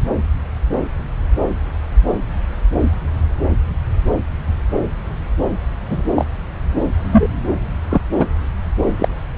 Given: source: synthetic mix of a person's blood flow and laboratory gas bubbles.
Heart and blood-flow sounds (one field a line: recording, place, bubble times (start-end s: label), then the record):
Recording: Doppler ultrasound of blood flow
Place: subclavian vein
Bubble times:
5.89-6.02 s: bubbles
6.16-6.25 s: bubbles
7.12-7.27 s: bubbles
7.89-7.97 s: bubbles
8.16-8.25 s: bubbles
8.98-9.08 s: bubbles
From the record:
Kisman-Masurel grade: 123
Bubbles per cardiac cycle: 1 to 2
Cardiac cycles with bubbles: 10 to 50%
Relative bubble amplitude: loud (0.450 to 0.775)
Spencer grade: 2 (many but less than half of the cardiac periods contain bubble signals, singularly or in groups)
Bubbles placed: anywhere in the cardiac cycle